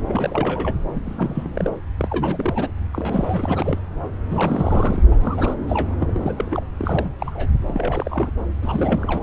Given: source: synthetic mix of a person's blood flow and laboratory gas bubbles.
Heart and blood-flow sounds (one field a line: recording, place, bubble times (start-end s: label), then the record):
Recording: Doppler ultrasound of blood flow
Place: subclavian vein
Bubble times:
0.00-0.75 s: bubbles
0.94-1.00 s: bubbles
1.04-1.49 s: bubbles
1.54-1.75 s: bubbles
1.97-2.74 s: bubbles
2.93-3.79 s: bubbles
4.29-5.04 s: bubbles
5.11-5.17 s: bubbles
5.21-5.55 s: bubbles
5.67-5.95 s: bubbles
6.00-6.65 s: bubbles
6.79-7.09 s: bubbles
7.19-7.50 s: bubbles
7.66-8.30 s: bubbles
8.62-9.23 s: bubbles
From the record:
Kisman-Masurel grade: 342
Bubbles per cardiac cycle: rolling drumbeat, 9 or more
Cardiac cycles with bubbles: 100%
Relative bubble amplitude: moderate (0.250 to 0.450)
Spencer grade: 3 (all of the cardiac periods contain showers or single bubble signals, but not dominating or overriding the cardiac motion signals)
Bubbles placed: anywhere in the cardiac cycle